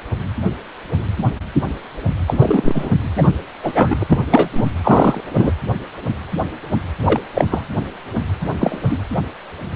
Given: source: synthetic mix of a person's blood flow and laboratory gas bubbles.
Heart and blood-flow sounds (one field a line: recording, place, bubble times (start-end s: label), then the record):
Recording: Doppler ultrasound of blood flow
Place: precordium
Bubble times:
2.27-2.90 s: bubbles
3.15-3.29 s: bubbles
3.63-3.96 s: bubbles
3.99-4.04 s: bubbles
4.10-4.22 s: bubbles
4.31-4.49 s: bubbles
4.54-4.64 s: bubbles
4.83-5.21 s: bubbles
5.33-5.51 s: bubbles
7.06-7.20 s: bubbles
7.33-7.45 s: bubbles
7.52-7.64 s: bubbles
8.60-8.78 s: bubbles
8.88-8.98 s: bubbles
From the record:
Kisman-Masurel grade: 223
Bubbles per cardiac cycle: several, 3 to 8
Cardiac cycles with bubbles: 10 to 50%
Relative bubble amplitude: loud (0.450 to 0.775)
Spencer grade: 2 (many but less than half of the cardiac periods contain bubble signals, singularly or in groups)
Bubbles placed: anywhere in the cardiac cycle